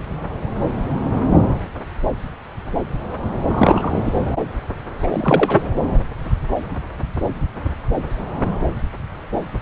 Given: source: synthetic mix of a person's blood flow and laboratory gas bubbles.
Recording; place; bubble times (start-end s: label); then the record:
Doppler ultrasound of blood flow; subclavian vein
3.46-4.13 s: bubbles
5.00-5.62 s: bubbles
From the record:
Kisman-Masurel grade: 213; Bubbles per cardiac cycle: several, 3 to 8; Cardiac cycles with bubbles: 1 to 10%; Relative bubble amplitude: loud (0.450 to 0.775); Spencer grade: 1 (occasional bubble signal discernible with the cardiac motion signal, with majority of cardiac periods free of bubbles); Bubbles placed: anywhere in the cardiac cycle